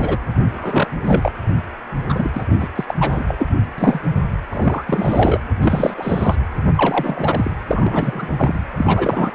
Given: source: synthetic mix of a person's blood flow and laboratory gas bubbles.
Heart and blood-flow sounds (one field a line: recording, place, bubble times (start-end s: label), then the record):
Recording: Doppler ultrasound of blood flow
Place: precordium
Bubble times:
0.00-0.17 s: bubbles
0.55-0.94 s: bubbles
1.01-1.31 s: bubbles
2.08-2.31 s: bubbles
2.33-2.46 s: bubbles
2.59-2.70 s: bubbles
2.75-2.84 s: bubbles
2.88-2.94 s: bubbles
3.00-3.23 s: bubbles
3.27-3.46 s: bubbles
3.78-4.00 s: bubbles
4.50-4.83 s: bubbles
4.85-5.40 s: bubbles
5.60-5.94 s: bubbles
5.97-6.37 s: bubbles
6.75-7.51 s: bubbles
7.67-8.29 s: bubbles
8.36-8.60 s: bubbles
8.77-9.31 s: bubbles
From the record:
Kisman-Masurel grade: 342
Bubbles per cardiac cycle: rolling drumbeat, 9 or more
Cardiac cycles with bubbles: 100%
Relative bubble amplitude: moderate (0.250 to 0.450)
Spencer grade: 3 (all of the cardiac periods contain showers or single bubble signals, but not dominating or overriding the cardiac motion signals)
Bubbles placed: anywhere in the cardiac cycle